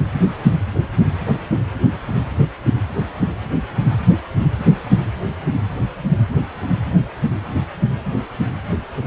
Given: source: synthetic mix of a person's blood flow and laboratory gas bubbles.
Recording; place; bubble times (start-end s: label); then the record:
Doppler ultrasound of blood flow; precordium
no bubbles
From the record:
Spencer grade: 0 (complete lack of bubble signals)